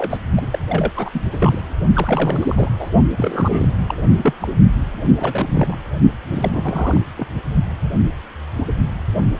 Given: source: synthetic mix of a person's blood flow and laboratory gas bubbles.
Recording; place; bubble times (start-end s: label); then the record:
Doppler ultrasound of blood flow; precordium
0.00-0.17 s: bubbles
0.36-0.48 s: bubbles
0.50-0.58 s: bubbles
0.69-0.92 s: bubbles
0.95-1.09 s: bubbles
1.13-1.21 s: bubbles
1.31-1.63 s: bubbles
1.93-2.69 s: bubbles
2.79-2.90 s: bubbles
3.17-3.74 s: bubbles
3.86-3.94 s: bubbles
4.22-4.33 s: bubbles
4.40-4.48 s: bubbles
5.17-5.77 s: bubbles
6.32-7.04 s: bubbles
7.18-7.28 s: bubbles
From the record:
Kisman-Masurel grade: 332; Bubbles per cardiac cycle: rolling drumbeat, 9 or more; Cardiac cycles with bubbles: 50 to 99%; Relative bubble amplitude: moderate (0.250 to 0.450); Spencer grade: 3 (all of the cardiac periods contain showers or single bubble signals, but not dominating or overriding the cardiac motion signals); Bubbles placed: only in the low amplitude regions of the cardiac cycle